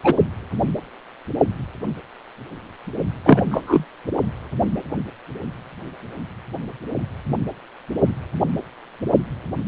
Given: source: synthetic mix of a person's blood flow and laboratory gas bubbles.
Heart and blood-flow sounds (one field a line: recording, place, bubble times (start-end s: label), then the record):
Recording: Doppler ultrasound of blood flow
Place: precordium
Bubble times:
0.03-0.14 s: bubbles
3.25-3.42 s: bubbles
3.50-3.84 s: bubbles
From the record:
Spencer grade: 2 (many but less than half of the cardiac periods contain bubble signals, singularly or in groups)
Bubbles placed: only in the low amplitude regions of the cardiac cycle